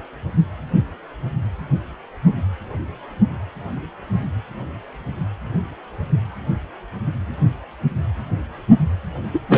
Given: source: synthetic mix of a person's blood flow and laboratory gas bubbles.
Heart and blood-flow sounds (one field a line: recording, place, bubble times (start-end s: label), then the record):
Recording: Doppler ultrasound of blood flow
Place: precordium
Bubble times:
9.34-9.39 s: bubbles
9.49-9.58 s: bubbles
From the record:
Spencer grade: 2 (many but less than half of the cardiac periods contain bubble signals, singularly or in groups)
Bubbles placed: anywhere in the cardiac cycle